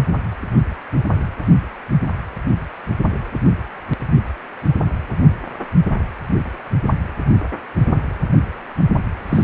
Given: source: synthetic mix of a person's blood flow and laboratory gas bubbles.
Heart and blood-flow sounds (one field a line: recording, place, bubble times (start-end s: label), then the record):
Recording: Doppler ultrasound of blood flow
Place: precordium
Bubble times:
9.28-9.43 s: bubbles
From the record:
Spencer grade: 1 (occasional bubble signal discernible with the cardiac motion signal, with majority of cardiac periods free of bubbles)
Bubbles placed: anywhere in the cardiac cycle